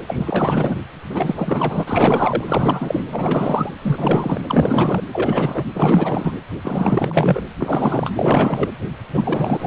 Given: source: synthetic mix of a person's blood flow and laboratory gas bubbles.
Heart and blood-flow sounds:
Doppler ultrasound of blood flow; precordium
0.07-0.78 s: bubbles
1.10-1.83 s: bubbles
1.86-2.44 s: bubbles
2.47-3.05 s: bubbles
3.10-3.72 s: bubbles
3.81-4.42 s: bubbles
4.47-5.03 s: bubbles
5.12-5.63 s: bubbles
5.74-6.33 s: bubbles
6.62-7.41 s: bubbles
7.57-8.15 s: bubbles
8.17-8.71 s: bubbles
9.13-9.67 s: bubbles
From the record:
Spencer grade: 4 (maximum detectable bubble signal sounding continuously throughout systole and diastole of every cardiac period, and overriding the amplitude of the normal cardiac signals); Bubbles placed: anywhere in the cardiac cycle

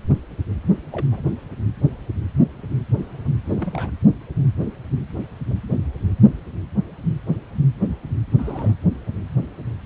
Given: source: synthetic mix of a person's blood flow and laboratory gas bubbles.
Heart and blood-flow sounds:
Doppler ultrasound of blood flow; precordium
0.63-0.80 s: bubbles
0.91-1.06 s: bubbles
1.11-1.22 s: bubbles
3.44-3.91 s: bubbles
8.37-8.75 s: bubbles
From the record:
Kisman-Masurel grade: 221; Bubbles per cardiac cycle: several, 3 to 8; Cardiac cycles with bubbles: 10 to 50%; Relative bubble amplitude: barely perceptible (0.100 to 0.250); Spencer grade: 2 (many but less than half of the cardiac periods contain bubble signals, singularly or in groups); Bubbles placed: anywhere in the cardiac cycle

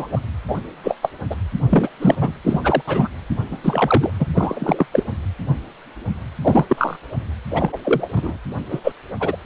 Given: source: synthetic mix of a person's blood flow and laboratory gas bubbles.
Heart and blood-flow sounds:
Doppler ultrasound of blood flow; precordium
0.00-0.07 s: bubbles
0.12-0.21 s: bubbles
0.47-0.57 s: bubbles
0.83-0.96 s: bubbles
1.02-1.09 s: bubbles
1.29-1.35 s: bubbles
1.69-1.89 s: bubbles
1.99-2.15 s: bubbles
2.21-2.32 s: bubbles
2.43-2.61 s: bubbles
2.64-2.82 s: bubbles
2.87-3.08 s: bubbles
3.50-3.58 s: bubbles
3.63-4.10 s: bubbles
4.19-4.25 s: bubbles
4.35-4.86 s: bubbles
4.92-5.04 s: bubbles
6.42-6.96 s: bubbles
7.50-7.78 s: bubbles
7.85-8.08 s: bubbles
8.14-8.37 s: bubbles
8.70-8.80 s: bubbles
8.83-8.92 s: bubbles
9.20-9.36 s: bubbles
From the record:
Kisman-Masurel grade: 233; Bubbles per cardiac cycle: several, 3 to 8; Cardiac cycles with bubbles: 50 to 99%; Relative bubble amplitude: loud (0.450 to 0.775); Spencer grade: 3 (all of the cardiac periods contain showers or single bubble signals, but not dominating or overriding the cardiac motion signals); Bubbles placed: anywhere in the cardiac cycle

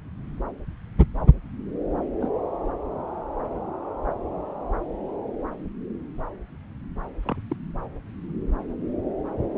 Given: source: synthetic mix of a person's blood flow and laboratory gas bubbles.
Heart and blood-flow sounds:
Doppler ultrasound of blood flow; subclavian vein
2.21-2.29 s: bubbles
7.23-7.41 s: bubbles
7.50-7.56 s: bubbles
From the record:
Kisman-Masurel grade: 121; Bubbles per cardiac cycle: 1 to 2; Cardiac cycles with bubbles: 10 to 50%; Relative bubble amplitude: barely perceptible (0.100 to 0.250); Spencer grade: 2 (many but less than half of the cardiac periods contain bubble signals, singularly or in groups); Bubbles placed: anywhere in the cardiac cycle

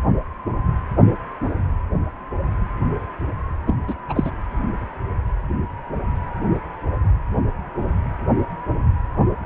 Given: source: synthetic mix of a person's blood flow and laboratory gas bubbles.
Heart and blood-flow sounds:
Doppler ultrasound of blood flow; precordium
3.67-3.75 s: bubbles
3.87-3.94 s: bubbles
4.09-4.31 s: bubbles
From the record:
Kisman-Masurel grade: 213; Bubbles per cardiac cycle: several, 3 to 8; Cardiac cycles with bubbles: 1 to 10%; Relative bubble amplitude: loud (0.450 to 0.775); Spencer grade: 1 (occasional bubble signal discernible with the cardiac motion signal, with majority of cardiac periods free of bubbles); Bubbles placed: anywhere in the cardiac cycle

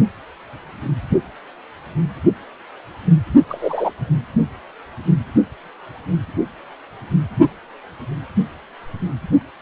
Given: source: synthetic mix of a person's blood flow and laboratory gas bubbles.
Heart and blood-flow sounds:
Doppler ultrasound of blood flow; precordium
3.48-3.92 s: bubbles
From the record:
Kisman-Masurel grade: 113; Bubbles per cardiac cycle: 1 to 2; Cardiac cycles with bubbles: 1 to 10%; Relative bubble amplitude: loud (0.450 to 0.775); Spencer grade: 1 (occasional bubble signal discernible with the cardiac motion signal, with majority of cardiac periods free of bubbles); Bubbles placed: only in the low amplitude regions of the cardiac cycle

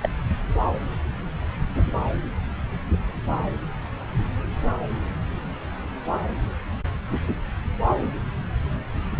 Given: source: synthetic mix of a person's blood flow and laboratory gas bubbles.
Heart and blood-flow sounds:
Doppler ultrasound of blood flow; subclavian vein
0.02-0.10 s: bubbles
From the record:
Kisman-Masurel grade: 212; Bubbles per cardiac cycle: several, 3 to 8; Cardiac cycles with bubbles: 1 to 10%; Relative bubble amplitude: moderate (0.250 to 0.450); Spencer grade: 1 (occasional bubble signal discernible with the cardiac motion signal, with majority of cardiac periods free of bubbles); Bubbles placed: anywhere in the cardiac cycle

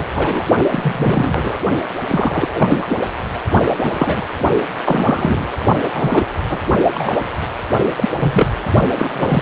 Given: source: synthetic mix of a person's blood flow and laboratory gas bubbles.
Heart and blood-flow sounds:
Doppler ultrasound of blood flow; precordium
0.14-0.48 s: bubbles
0.69-1.59 s: bubbles
2.08-2.48 s: bubbles
2.54-2.96 s: bubbles
3.83-4.27 s: bubbles
4.83-5.47 s: bubbles
5.78-5.84 s: bubbles
5.93-6.23 s: bubbles
6.49-6.59 s: bubbles
6.95-7.13 s: bubbles
7.96-8.09 s: bubbles
8.18-8.51 s: bubbles
8.95-9.42 s: bubbles
From the record:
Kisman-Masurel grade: 233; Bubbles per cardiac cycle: several, 3 to 8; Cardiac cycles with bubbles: 50 to 99%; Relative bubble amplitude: loud (0.450 to 0.775); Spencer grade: 3 (all of the cardiac periods contain showers or single bubble signals, but not dominating or overriding the cardiac motion signals); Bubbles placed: only in the low amplitude regions of the cardiac cycle

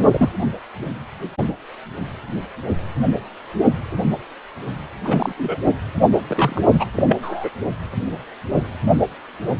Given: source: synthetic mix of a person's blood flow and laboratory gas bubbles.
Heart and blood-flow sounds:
Doppler ultrasound of blood flow; precordium
0.00-0.29 s: bubbles
5.05-5.33 s: bubbles
5.38-5.59 s: bubbles
6.13-6.21 s: bubbles
6.27-6.61 s: bubbles
6.72-6.85 s: bubbles
6.96-7.03 s: bubbles
7.06-7.17 s: bubbles
7.22-7.50 s: bubbles
From the record:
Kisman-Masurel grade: 223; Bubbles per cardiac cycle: several, 3 to 8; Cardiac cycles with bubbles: 10 to 50%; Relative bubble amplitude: loud (0.450 to 0.775); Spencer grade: 2 (many but less than half of the cardiac periods contain bubble signals, singularly or in groups); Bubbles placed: anywhere in the cardiac cycle

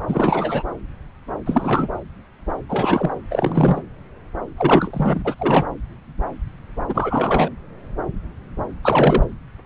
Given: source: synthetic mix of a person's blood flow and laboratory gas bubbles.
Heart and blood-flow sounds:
Doppler ultrasound of blood flow; subclavian vein
0.08-0.63 s: bubbles
1.45-1.88 s: bubbles
2.69-3.11 s: bubbles
3.31-3.82 s: bubbles
4.57-5.35 s: bubbles
5.38-5.66 s: bubbles
6.89-7.51 s: bubbles
8.82-9.24 s: bubbles
From the record:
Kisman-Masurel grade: 333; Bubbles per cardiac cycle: rolling drumbeat, 9 or more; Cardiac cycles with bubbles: 50 to 99%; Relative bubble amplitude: loud (0.450 to 0.775); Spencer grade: 3 (all of the cardiac periods contain showers or single bubble signals, but not dominating or overriding the cardiac motion signals); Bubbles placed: anywhere in the cardiac cycle

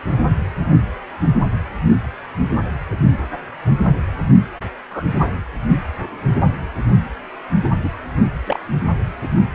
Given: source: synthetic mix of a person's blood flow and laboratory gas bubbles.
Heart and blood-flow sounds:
Doppler ultrasound of blood flow; precordium
4.90-5.03 s: bubbles
7.62-7.70 s: bubbles
7.84-7.88 s: bubbles
8.46-8.60 s: bubbles
From the record:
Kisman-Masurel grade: 122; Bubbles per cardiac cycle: 1 to 2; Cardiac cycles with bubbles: 10 to 50%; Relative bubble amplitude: moderate (0.250 to 0.450); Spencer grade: 2 (many but less than half of the cardiac periods contain bubble signals, singularly or in groups); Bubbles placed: only in the low amplitude regions of the cardiac cycle

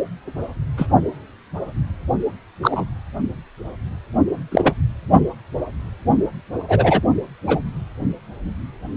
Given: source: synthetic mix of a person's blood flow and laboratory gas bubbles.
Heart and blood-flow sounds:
Doppler ultrasound of blood flow; precordium
0.77-0.86 s: bubbles
2.62-2.85 s: bubbles
4.51-4.72 s: bubbles
6.68-7.01 s: bubbles
7.46-7.60 s: bubbles
From the record:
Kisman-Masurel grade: 123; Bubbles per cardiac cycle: 1 to 2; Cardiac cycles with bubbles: 10 to 50%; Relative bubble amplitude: loud (0.450 to 0.775); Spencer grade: 2 (many but less than half of the cardiac periods contain bubble signals, singularly or in groups); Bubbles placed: only in the low amplitude regions of the cardiac cycle

